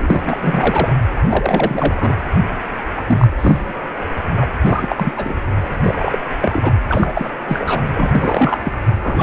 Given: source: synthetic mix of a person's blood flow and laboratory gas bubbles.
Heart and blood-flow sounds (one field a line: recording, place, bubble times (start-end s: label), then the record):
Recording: Doppler ultrasound of blood flow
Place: precordium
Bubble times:
0.00-0.37 s: bubbles
0.41-0.92 s: bubbles
1.15-2.16 s: bubbles
2.96-3.02 s: bubbles
3.06-3.27 s: bubbles
3.37-3.74 s: bubbles
4.28-4.45 s: bubbles
4.62-5.12 s: bubbles
5.16-5.38 s: bubbles
5.83-6.18 s: bubbles
6.41-6.71 s: bubbles
6.88-7.30 s: bubbles
7.48-7.89 s: bubbles
7.92-8.59 s: bubbles
8.64-8.73 s: bubbles
9.03-9.23 s: bubbles
From the record:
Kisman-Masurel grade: 342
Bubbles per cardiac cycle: rolling drumbeat, 9 or more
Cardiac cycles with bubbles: 100%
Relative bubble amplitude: moderate (0.250 to 0.450)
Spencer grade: 3 (all of the cardiac periods contain showers or single bubble signals, but not dominating or overriding the cardiac motion signals)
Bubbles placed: anywhere in the cardiac cycle